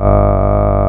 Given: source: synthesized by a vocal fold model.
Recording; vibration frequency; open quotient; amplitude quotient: sustained vowel; 50 Hz; 0.5; 1